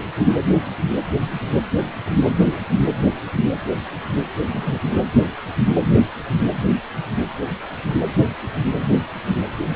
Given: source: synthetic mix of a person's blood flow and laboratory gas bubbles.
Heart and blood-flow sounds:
Doppler ultrasound of blood flow; precordium
4.53-4.78 s: bubbles
From the record:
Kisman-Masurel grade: 112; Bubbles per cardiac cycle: 1 to 2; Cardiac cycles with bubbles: 1 to 10%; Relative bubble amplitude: moderate (0.250 to 0.450); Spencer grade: 1 (occasional bubble signal discernible with the cardiac motion signal, with majority of cardiac periods free of bubbles); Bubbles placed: anywhere in the cardiac cycle

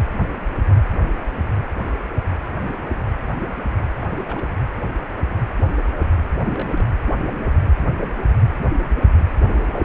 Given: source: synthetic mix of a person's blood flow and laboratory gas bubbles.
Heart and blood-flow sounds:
Doppler ultrasound of blood flow; precordium
4.00-4.48 s: bubbles
6.52-6.71 s: bubbles
6.74-6.91 s: bubbles
From the record:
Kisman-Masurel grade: 221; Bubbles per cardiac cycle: several, 3 to 8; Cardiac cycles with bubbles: 10 to 50%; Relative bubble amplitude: barely perceptible (0.100 to 0.250); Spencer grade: 2 (many but less than half of the cardiac periods contain bubble signals, singularly or in groups); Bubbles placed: anywhere in the cardiac cycle

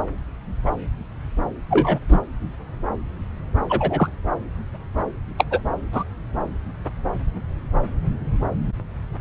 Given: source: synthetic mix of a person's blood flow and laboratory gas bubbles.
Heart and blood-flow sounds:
Doppler ultrasound of blood flow; subclavian vein
0.66-0.71 s: bubbles
1.70-1.98 s: bubbles
2.08-2.19 s: bubbles
3.69-4.09 s: bubbles
5.38-5.45 s: bubbles
5.50-5.59 s: bubbles
5.92-6.04 s: bubbles
From the record:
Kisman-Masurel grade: 123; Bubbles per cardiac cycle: 1 to 2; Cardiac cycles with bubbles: 10 to 50%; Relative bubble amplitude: loud (0.450 to 0.775); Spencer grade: 2 (many but less than half of the cardiac periods contain bubble signals, singularly or in groups); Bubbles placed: anywhere in the cardiac cycle

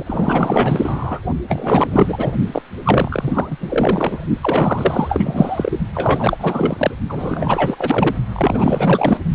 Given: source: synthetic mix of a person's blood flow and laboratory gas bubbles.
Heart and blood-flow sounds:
Doppler ultrasound of blood flow; precordium
0.00-0.04 s: bubbles
0.06-1.19 s: bubbles
1.49-2.34 s: bubbles
2.51-2.62 s: bubbles
2.83-3.57 s: bubbles
3.60-4.20 s: bubbles
4.41-5.77 s: bubbles
5.94-6.91 s: bubbles
7.09-8.16 s: bubbles
8.32-9.18 s: bubbles
From the record:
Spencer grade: 4 (maximum detectable bubble signal sounding continuously throughout systole and diastole of every cardiac period, and overriding the amplitude of the normal cardiac signals); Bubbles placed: only in the low amplitude regions of the cardiac cycle

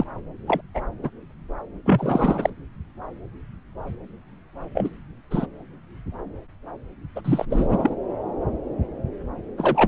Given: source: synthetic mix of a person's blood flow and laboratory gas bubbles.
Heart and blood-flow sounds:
Doppler ultrasound of blood flow; subclavian vein
0.00-0.04 s: bubbles
0.47-0.61 s: bubbles
0.74-0.81 s: bubbles
1.02-1.09 s: bubbles
1.85-2.50 s: bubbles
4.75-4.89 s: bubbles
5.31-5.46 s: bubbles
7.16-7.21 s: bubbles
7.25-7.46 s: bubbles
7.50-7.95 s: bubbles
9.58-9.88 s: bubbles
From the record:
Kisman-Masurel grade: 232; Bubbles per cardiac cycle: several, 3 to 8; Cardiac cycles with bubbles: 50 to 99%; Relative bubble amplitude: moderate (0.250 to 0.450); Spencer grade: 3 (all of the cardiac periods contain showers or single bubble signals, but not dominating or overriding the cardiac motion signals); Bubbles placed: anywhere in the cardiac cycle

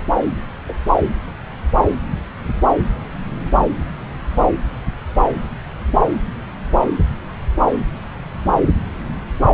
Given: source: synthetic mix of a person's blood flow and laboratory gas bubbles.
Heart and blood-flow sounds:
Doppler ultrasound of blood flow; subclavian vein
0.68-0.73 s: bubbles
From the record:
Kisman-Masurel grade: 113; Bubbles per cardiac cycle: 1 to 2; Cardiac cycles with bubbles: 1 to 10%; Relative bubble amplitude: loud (0.450 to 0.775); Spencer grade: 1 (occasional bubble signal discernible with the cardiac motion signal, with majority of cardiac periods free of bubbles); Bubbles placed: anywhere in the cardiac cycle

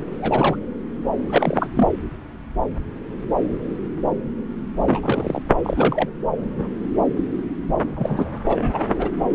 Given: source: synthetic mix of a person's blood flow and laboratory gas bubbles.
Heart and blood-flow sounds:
Doppler ultrasound of blood flow; subclavian vein
0.18-0.56 s: bubbles
1.30-1.68 s: bubbles
1.75-1.88 s: bubbles
4.83-5.42 s: bubbles
5.63-6.09 s: bubbles
7.96-8.28 s: bubbles
8.45-8.79 s: bubbles
8.99-9.10 s: bubbles
From the record:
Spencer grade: 2 (many but less than half of the cardiac periods contain bubble signals, singularly or in groups); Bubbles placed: anywhere in the cardiac cycle

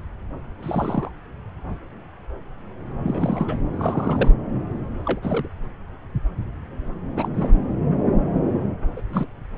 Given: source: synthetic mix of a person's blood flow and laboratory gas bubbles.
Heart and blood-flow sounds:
Doppler ultrasound of blood flow; subclavian vein
0.62-1.10 s: bubbles
3.03-3.57 s: bubbles
3.74-4.32 s: bubbles
5.06-5.48 s: bubbles
7.16-7.29 s: bubbles
7.34-7.51 s: bubbles
8.96-9.02 s: bubbles
9.10-9.27 s: bubbles
From the record:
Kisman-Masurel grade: 222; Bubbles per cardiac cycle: several, 3 to 8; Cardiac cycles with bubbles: 10 to 50%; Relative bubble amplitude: moderate (0.250 to 0.450); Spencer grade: 2 (many but less than half of the cardiac periods contain bubble signals, singularly or in groups); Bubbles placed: anywhere in the cardiac cycle

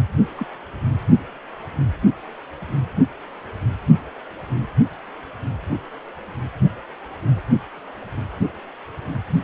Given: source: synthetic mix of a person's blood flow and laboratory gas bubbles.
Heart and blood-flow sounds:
Doppler ultrasound of blood flow; precordium
0.36-0.46 s: bubbles
From the record:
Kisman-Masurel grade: 111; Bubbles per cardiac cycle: 1 to 2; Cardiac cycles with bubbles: 1 to 10%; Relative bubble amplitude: barely perceptible (0.100 to 0.250); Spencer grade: 1 (occasional bubble signal discernible with the cardiac motion signal, with majority of cardiac periods free of bubbles); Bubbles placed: anywhere in the cardiac cycle

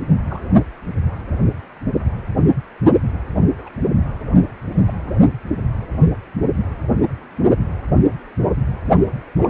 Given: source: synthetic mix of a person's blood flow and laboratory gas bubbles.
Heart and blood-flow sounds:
Doppler ultrasound of blood flow; precordium
0.28-0.42 s: bubbles
3.58-3.70 s: bubbles
4.85-4.94 s: bubbles
9.43-9.47 s: bubbles
From the record:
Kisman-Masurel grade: 121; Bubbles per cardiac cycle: 1 to 2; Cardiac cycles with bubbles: 10 to 50%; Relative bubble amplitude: barely perceptible (0.100 to 0.250); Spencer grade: 2 (many but less than half of the cardiac periods contain bubble signals, singularly or in groups); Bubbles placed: only in the low amplitude regions of the cardiac cycle

